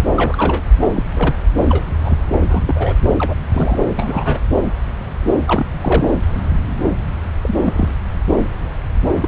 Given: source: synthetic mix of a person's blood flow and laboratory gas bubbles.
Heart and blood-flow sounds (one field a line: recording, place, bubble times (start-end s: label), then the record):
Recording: Doppler ultrasound of blood flow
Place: subclavian vein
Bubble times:
0.16-0.62 s: bubbles
0.81-0.89 s: bubbles
0.94-1.03 s: bubbles
1.15-1.34 s: bubbles
1.56-1.84 s: bubbles
2.04-2.19 s: bubbles
2.32-2.37 s: bubbles
2.48-2.94 s: bubbles
3.15-3.35 s: bubbles
3.52-3.79 s: bubbles
3.85-4.40 s: bubbles
5.46-6.09 s: bubbles
7.42-7.55 s: bubbles
7.65-7.89 s: bubbles
9.20-9.28 s: bubbles
From the record:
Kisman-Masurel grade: 232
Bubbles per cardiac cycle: several, 3 to 8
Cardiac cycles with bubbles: 50 to 99%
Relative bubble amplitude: moderate (0.250 to 0.450)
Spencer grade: 3 (all of the cardiac periods contain showers or single bubble signals, but not dominating or overriding the cardiac motion signals)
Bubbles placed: anywhere in the cardiac cycle